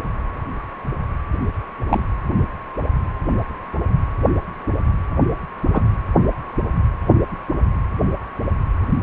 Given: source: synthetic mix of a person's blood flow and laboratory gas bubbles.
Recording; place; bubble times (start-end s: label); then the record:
Doppler ultrasound of blood flow; precordium
1.89-2.03 s: bubbles
5.73-5.82 s: bubbles
From the record:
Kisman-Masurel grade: 123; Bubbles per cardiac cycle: 1 to 2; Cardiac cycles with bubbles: 10 to 50%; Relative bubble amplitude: loud (0.450 to 0.775); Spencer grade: 2 (many but less than half of the cardiac periods contain bubble signals, singularly or in groups); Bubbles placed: anywhere in the cardiac cycle